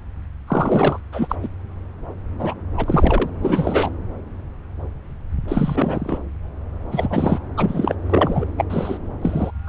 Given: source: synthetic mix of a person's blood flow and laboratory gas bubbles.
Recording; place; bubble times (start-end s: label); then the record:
Doppler ultrasound of blood flow; subclavian vein
0.47-1.00 s: bubbles
1.12-1.35 s: bubbles
1.42-1.48 s: bubbles
2.39-2.55 s: bubbles
2.77-3.31 s: bubbles
3.42-3.90 s: bubbles
5.48-6.19 s: bubbles
6.91-7.39 s: bubbles
7.57-7.95 s: bubbles
8.06-8.46 s: bubbles
8.57-8.64 s: bubbles
8.69-8.98 s: bubbles
9.21-9.51 s: bubbles
9.66-9.69 s: bubbles
From the record:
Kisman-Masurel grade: 233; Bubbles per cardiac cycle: several, 3 to 8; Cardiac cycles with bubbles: 50 to 99%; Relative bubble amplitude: loud (0.450 to 0.775); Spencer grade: 3 (all of the cardiac periods contain showers or single bubble signals, but not dominating or overriding the cardiac motion signals); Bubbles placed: anywhere in the cardiac cycle